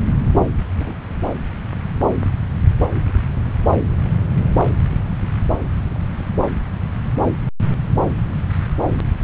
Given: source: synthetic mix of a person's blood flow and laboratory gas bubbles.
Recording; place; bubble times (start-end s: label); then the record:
Doppler ultrasound of blood flow; subclavian vein
0.80-0.94 s: bubbles
3.58-3.66 s: bubbles
4.38-4.52 s: bubbles
From the record:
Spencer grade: 2 (many but less than half of the cardiac periods contain bubble signals, singularly or in groups); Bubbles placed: anywhere in the cardiac cycle